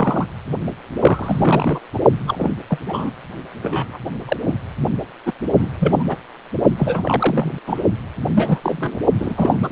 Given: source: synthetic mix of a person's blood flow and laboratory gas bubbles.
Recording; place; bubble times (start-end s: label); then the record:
Doppler ultrasound of blood flow; precordium
0.00-0.26 s: bubbles
0.98-1.81 s: bubbles
1.94-1.99 s: bubbles
2.27-2.51 s: bubbles
2.69-2.78 s: bubbles
2.87-3.10 s: bubbles
3.62-3.98 s: bubbles
4.28-4.37 s: bubbles
4.45-4.55 s: bubbles
5.25-5.33 s: bubbles
5.58-5.70 s: bubbles
5.79-6.04 s: bubbles
6.08-6.17 s: bubbles
6.77-7.58 s: bubbles
7.66-7.83 s: bubbles
8.35-9.00 s: bubbles
9.19-9.72 s: bubbles
From the record:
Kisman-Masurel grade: 242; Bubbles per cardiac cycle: several, 3 to 8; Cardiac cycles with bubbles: 100%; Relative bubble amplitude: moderate (0.250 to 0.450); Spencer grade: 3 (all of the cardiac periods contain showers or single bubble signals, but not dominating or overriding the cardiac motion signals); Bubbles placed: only in the low amplitude regions of the cardiac cycle